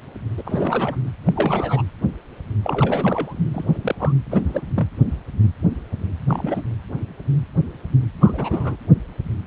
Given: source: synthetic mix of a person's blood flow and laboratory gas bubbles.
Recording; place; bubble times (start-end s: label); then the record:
Doppler ultrasound of blood flow; precordium
0.37-0.42 s: bubbles
0.45-0.97 s: bubbles
1.25-1.32 s: bubbles
1.35-1.82 s: bubbles
2.64-3.39 s: bubbles
3.54-3.78 s: bubbles
3.81-3.95 s: bubbles
3.98-4.12 s: bubbles
4.30-4.61 s: bubbles
4.75-4.89 s: bubbles
6.28-6.63 s: bubbles
8.21-8.77 s: bubbles
From the record:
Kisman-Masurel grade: 222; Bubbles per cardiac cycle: several, 3 to 8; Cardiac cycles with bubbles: 10 to 50%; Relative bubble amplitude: moderate (0.250 to 0.450); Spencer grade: 2 (many but less than half of the cardiac periods contain bubble signals, singularly or in groups); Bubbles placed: anywhere in the cardiac cycle